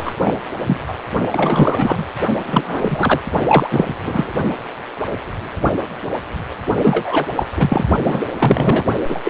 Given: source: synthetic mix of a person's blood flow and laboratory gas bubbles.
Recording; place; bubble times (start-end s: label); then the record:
Doppler ultrasound of blood flow; precordium
0.00-0.14 s: bubbles
0.20-0.33 s: bubbles
0.67-0.81 s: bubbles
0.87-0.94 s: bubbles
1.32-2.04 s: bubbles
2.46-3.20 s: bubbles
3.49-3.68 s: bubbles
3.71-3.95 s: bubbles
4.05-4.33 s: bubbles
6.78-7.26 s: bubbles
7.36-7.46 s: bubbles
7.56-7.86 s: bubbles
8.04-8.22 s: bubbles
8.32-8.84 s: bubbles
9.08-9.19 s: bubbles
9.24-9.29 s: bubbles
From the record:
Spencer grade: 3 (all of the cardiac periods contain showers or single bubble signals, but not dominating or overriding the cardiac motion signals); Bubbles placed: only in the low amplitude regions of the cardiac cycle